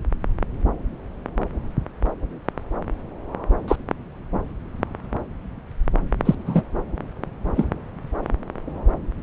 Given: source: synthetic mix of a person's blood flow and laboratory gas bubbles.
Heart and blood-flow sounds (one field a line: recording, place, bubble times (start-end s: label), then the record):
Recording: Doppler ultrasound of blood flow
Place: subclavian vein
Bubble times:
3.68-3.76 s: bubbles
6.25-6.35 s: bubbles
6.46-6.63 s: bubbles
7.56-7.67 s: bubbles
From the record:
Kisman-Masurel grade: 123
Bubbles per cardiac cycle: 1 to 2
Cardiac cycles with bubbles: 10 to 50%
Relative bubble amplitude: loud (0.450 to 0.775)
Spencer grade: 2 (many but less than half of the cardiac periods contain bubble signals, singularly or in groups)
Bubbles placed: anywhere in the cardiac cycle